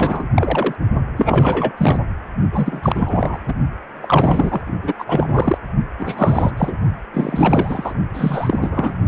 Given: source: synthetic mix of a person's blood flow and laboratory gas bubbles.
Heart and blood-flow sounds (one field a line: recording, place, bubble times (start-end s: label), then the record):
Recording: Doppler ultrasound of blood flow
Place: precordium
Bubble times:
0.00-0.23 s: bubbles
0.35-0.76 s: bubbles
1.17-1.72 s: bubbles
1.77-1.99 s: bubbles
2.52-3.39 s: bubbles
3.48-3.53 s: bubbles
4.02-4.61 s: bubbles
4.83-4.93 s: bubbles
4.98-5.58 s: bubbles
5.99-6.52 s: bubbles
6.57-6.74 s: bubbles
7.13-7.93 s: bubbles
8.13-8.97 s: bubbles
From the record:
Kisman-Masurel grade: 342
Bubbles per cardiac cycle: rolling drumbeat, 9 or more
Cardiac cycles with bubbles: 100%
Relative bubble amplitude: moderate (0.250 to 0.450)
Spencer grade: 3 (all of the cardiac periods contain showers or single bubble signals, but not dominating or overriding the cardiac motion signals)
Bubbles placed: only in the low amplitude regions of the cardiac cycle